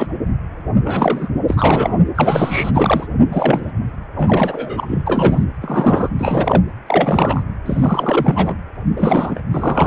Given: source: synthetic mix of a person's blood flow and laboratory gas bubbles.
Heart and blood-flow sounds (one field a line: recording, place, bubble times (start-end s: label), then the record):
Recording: Doppler ultrasound of blood flow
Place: precordium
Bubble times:
0.00-0.16 s: bubbles
0.84-1.29 s: bubbles
1.48-1.99 s: bubbles
2.15-2.71 s: bubbles
2.74-3.07 s: bubbles
3.29-3.72 s: bubbles
4.15-5.44 s: bubbles
5.62-6.09 s: bubbles
6.18-6.62 s: bubbles
6.86-7.43 s: bubbles
7.65-8.55 s: bubbles
8.96-9.41 s: bubbles
9.51-9.87 s: bubbles
From the record:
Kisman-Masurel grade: 333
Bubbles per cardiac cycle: rolling drumbeat, 9 or more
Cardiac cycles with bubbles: 50 to 99%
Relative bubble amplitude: loud (0.450 to 0.775)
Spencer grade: 3 (all of the cardiac periods contain showers or single bubble signals, but not dominating or overriding the cardiac motion signals)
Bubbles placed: anywhere in the cardiac cycle